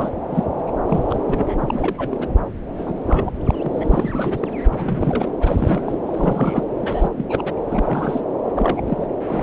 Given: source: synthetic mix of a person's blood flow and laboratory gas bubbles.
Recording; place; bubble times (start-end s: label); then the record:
Doppler ultrasound of blood flow; subclavian vein
0.00-0.10 s: bubbles
0.30-0.45 s: bubbles
0.58-0.72 s: bubbles
0.86-1.55 s: bubbles
1.61-2.29 s: bubbles
2.77-3.00 s: bubbles
3.05-3.36 s: bubbles
3.45-4.49 s: bubbles
4.73-5.32 s: bubbles
5.40-5.98 s: bubbles
6.07-6.64 s: bubbles
6.81-7.08 s: bubbles
7.16-7.25 s: bubbles
7.29-7.53 s: bubbles
7.67-8.24 s: bubbles
8.45-8.52 s: bubbles
8.55-8.81 s: bubbles
8.86-9.08 s: bubbles
9.26-9.43 s: bubbles
From the record:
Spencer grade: 3 (all of the cardiac periods contain showers or single bubble signals, but not dominating or overriding the cardiac motion signals); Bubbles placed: anywhere in the cardiac cycle